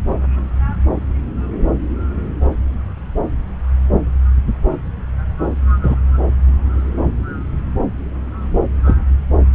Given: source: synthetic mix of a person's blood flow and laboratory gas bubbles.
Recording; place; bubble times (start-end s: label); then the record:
Doppler ultrasound of blood flow; subclavian vein
5.83-5.95 s: bubbles
8.84-8.94 s: bubbles
From the record:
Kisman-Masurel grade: 113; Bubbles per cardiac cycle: 1 to 2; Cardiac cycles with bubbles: 1 to 10%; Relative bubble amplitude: loud (0.450 to 0.775); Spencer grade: 1 (occasional bubble signal discernible with the cardiac motion signal, with majority of cardiac periods free of bubbles); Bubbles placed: anywhere in the cardiac cycle